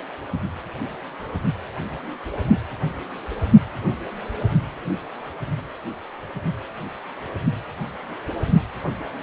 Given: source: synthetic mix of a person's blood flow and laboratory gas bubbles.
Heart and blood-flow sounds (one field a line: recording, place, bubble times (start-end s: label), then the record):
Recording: Doppler ultrasound of blood flow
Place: precordium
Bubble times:
8.87-8.93 s: bubbles
From the record:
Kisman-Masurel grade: 122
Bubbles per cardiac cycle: 1 to 2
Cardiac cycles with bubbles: 10 to 50%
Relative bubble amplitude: moderate (0.250 to 0.450)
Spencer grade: 2 (many but less than half of the cardiac periods contain bubble signals, singularly or in groups)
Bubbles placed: anywhere in the cardiac cycle